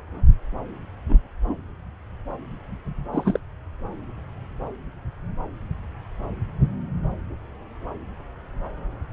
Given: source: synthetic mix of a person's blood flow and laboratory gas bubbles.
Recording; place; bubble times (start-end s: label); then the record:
Doppler ultrasound of blood flow; subclavian vein
1.09-1.19 s: bubbles
1.46-1.56 s: bubbles
3.12-3.40 s: bubbles
From the record:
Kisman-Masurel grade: 122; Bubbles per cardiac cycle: 1 to 2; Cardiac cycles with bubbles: 10 to 50%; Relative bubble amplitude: moderate (0.250 to 0.450); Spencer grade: 2 (many but less than half of the cardiac periods contain bubble signals, singularly or in groups); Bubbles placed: anywhere in the cardiac cycle